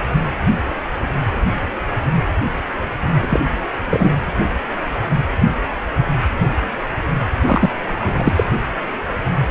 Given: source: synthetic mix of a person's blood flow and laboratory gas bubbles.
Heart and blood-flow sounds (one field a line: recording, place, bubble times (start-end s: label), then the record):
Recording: Doppler ultrasound of blood flow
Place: precordium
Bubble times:
3.19-3.40 s: bubbles
3.87-4.11 s: bubbles
7.46-7.70 s: bubbles
7.85-8.44 s: bubbles
From the record:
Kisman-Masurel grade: 223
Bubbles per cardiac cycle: several, 3 to 8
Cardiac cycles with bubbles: 10 to 50%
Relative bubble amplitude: loud (0.450 to 0.775)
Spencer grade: 2 (many but less than half of the cardiac periods contain bubble signals, singularly or in groups)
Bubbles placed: anywhere in the cardiac cycle